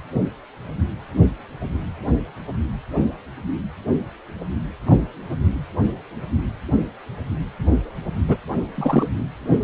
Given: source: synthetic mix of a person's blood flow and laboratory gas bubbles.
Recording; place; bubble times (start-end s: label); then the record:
Doppler ultrasound of blood flow; precordium
4.86-4.96 s: bubbles
8.28-8.37 s: bubbles
8.75-9.08 s: bubbles
From the record:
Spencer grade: 2 (many but less than half of the cardiac periods contain bubble signals, singularly or in groups); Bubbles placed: anywhere in the cardiac cycle